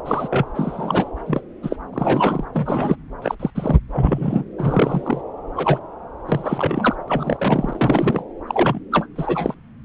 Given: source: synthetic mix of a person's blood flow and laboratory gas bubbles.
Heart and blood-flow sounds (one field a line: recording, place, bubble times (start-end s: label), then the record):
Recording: Doppler ultrasound of blood flow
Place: subclavian vein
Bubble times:
0.06-0.45 s: bubbles
0.54-1.08 s: bubbles
1.26-1.41 s: bubbles
1.62-1.76 s: bubbles
1.93-2.44 s: bubbles
2.54-2.96 s: bubbles
3.21-3.35 s: bubbles
3.40-3.50 s: bubbles
3.54-3.79 s: bubbles
3.93-4.44 s: bubbles
4.58-5.21 s: bubbles
5.55-5.79 s: bubbles
6.28-6.96 s: bubbles
7.08-8.23 s: bubbles
8.47-8.80 s: bubbles
8.92-9.07 s: bubbles
9.16-9.55 s: bubbles
From the record:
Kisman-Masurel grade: 242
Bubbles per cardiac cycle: several, 3 to 8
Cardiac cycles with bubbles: 100%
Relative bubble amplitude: moderate (0.250 to 0.450)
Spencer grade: 3 (all of the cardiac periods contain showers or single bubble signals, but not dominating or overriding the cardiac motion signals)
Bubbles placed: anywhere in the cardiac cycle